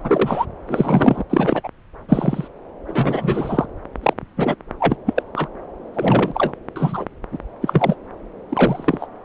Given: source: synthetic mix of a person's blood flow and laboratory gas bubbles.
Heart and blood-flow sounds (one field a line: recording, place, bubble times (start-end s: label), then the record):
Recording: Doppler ultrasound of blood flow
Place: subclavian vein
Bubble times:
0.03-0.45 s: bubbles
0.67-1.23 s: bubbles
1.29-1.69 s: bubbles
2.08-2.48 s: bubbles
2.88-3.65 s: bubbles
4.03-4.13 s: bubbles
4.37-4.55 s: bubbles
4.79-4.97 s: bubbles
5.05-5.23 s: bubbles
5.35-5.48 s: bubbles
5.94-6.53 s: bubbles
6.76-7.06 s: bubbles
7.31-7.38 s: bubbles
7.62-7.96 s: bubbles
8.49-9.07 s: bubbles
From the record:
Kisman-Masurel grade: 243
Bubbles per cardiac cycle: several, 3 to 8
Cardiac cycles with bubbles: 100%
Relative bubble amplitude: loud (0.450 to 0.775)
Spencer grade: 3 (all of the cardiac periods contain showers or single bubble signals, but not dominating or overriding the cardiac motion signals)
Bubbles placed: anywhere in the cardiac cycle